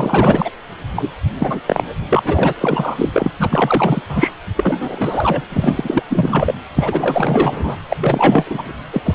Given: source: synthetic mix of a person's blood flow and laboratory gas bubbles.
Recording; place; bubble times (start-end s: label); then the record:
Doppler ultrasound of blood flow; precordium
0.00-0.51 s: bubbles
0.95-1.09 s: bubbles
1.40-1.60 s: bubbles
1.66-1.84 s: bubbles
2.10-2.52 s: bubbles
2.60-3.10 s: bubbles
3.13-3.33 s: bubbles
3.39-4.01 s: bubbles
4.09-4.32 s: bubbles
4.55-5.42 s: bubbles
5.49-6.04 s: bubbles
6.09-6.54 s: bubbles
6.75-7.76 s: bubbles
7.88-7.96 s: bubbles
8.00-8.73 s: bubbles
8.93-9.15 s: bubbles
From the record:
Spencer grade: 4 (maximum detectable bubble signal sounding continuously throughout systole and diastole of every cardiac period, and overriding the amplitude of the normal cardiac signals); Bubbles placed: anywhere in the cardiac cycle